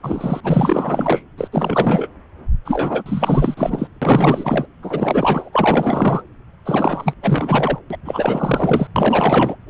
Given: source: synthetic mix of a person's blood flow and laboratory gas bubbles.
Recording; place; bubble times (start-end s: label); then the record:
Doppler ultrasound of blood flow; subclavian vein
0.03-0.41 s: bubbles
0.43-1.23 s: bubbles
1.37-1.48 s: bubbles
1.52-2.08 s: bubbles
2.65-3.54 s: bubbles
3.57-3.88 s: bubbles
4.02-4.66 s: bubbles
4.82-5.50 s: bubbles
5.53-6.22 s: bubbles
6.65-7.13 s: bubbles
7.22-7.79 s: bubbles
7.90-7.97 s: bubbles
8.04-8.87 s: bubbles
8.96-9.55 s: bubbles
From the record:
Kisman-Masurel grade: 444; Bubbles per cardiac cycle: continuous sound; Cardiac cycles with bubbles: 100%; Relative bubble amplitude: maximal (0.775 to 0.999); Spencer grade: 4 (maximum detectable bubble signal sounding continuously throughout systole and diastole of every cardiac period, and overriding the amplitude of the normal cardiac signals); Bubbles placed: anywhere in the cardiac cycle